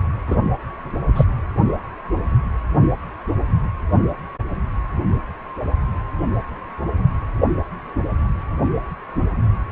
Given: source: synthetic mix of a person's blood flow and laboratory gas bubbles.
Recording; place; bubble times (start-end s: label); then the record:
Doppler ultrasound of blood flow; precordium
0.27-0.36 s: bubbles
1.15-1.25 s: bubbles
From the record:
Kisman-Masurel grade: 123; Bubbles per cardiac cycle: 1 to 2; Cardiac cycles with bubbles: 10 to 50%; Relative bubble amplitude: loud (0.450 to 0.775); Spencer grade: 2 (many but less than half of the cardiac periods contain bubble signals, singularly or in groups); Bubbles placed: anywhere in the cardiac cycle